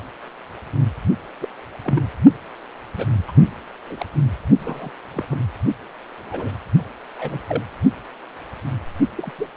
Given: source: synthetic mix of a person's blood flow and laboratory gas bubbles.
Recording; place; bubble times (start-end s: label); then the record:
Doppler ultrasound of blood flow; precordium
1.41-1.48 s: bubbles
1.84-2.02 s: bubbles
2.96-3.06 s: bubbles
3.27-3.31 s: bubbles
3.85-3.96 s: bubbles
4.00-4.06 s: bubbles
4.58-4.91 s: bubbles
5.13-5.25 s: bubbles
5.31-5.37 s: bubbles
6.20-6.51 s: bubbles
7.18-7.39 s: bubbles
7.49-7.63 s: bubbles
9.17-9.31 s: bubbles
9.39-9.50 s: bubbles
From the record:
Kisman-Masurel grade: 221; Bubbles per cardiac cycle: several, 3 to 8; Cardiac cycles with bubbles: 10 to 50%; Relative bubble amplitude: barely perceptible (0.100 to 0.250); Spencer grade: 2 (many but less than half of the cardiac periods contain bubble signals, singularly or in groups); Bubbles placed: only in the low amplitude regions of the cardiac cycle